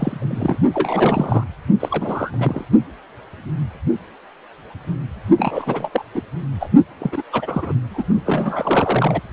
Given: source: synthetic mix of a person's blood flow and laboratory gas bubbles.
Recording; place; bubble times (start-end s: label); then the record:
Doppler ultrasound of blood flow; precordium
0.00-0.58 s: bubbles
0.73-1.44 s: bubbles
1.79-2.65 s: bubbles
5.38-6.04 s: bubbles
6.14-6.21 s: bubbles
6.60-6.70 s: bubbles
7.00-7.22 s: bubbles
7.32-7.73 s: bubbles
7.90-8.04 s: bubbles
8.26-9.21 s: bubbles
From the record:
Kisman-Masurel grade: 332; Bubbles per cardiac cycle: rolling drumbeat, 9 or more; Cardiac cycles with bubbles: 50 to 99%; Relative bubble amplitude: moderate (0.250 to 0.450); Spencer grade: 3 (all of the cardiac periods contain showers or single bubble signals, but not dominating or overriding the cardiac motion signals); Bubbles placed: only in the low amplitude regions of the cardiac cycle